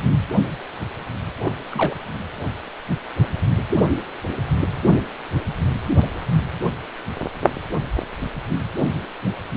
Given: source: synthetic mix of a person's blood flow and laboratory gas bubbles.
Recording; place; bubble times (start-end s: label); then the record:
Doppler ultrasound of blood flow; precordium
1.43-1.55 s: bubbles
1.70-1.96 s: bubbles
From the record:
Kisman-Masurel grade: 211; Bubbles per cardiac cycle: several, 3 to 8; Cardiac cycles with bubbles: 1 to 10%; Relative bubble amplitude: barely perceptible (0.100 to 0.250); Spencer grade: 1 (occasional bubble signal discernible with the cardiac motion signal, with majority of cardiac periods free of bubbles); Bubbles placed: anywhere in the cardiac cycle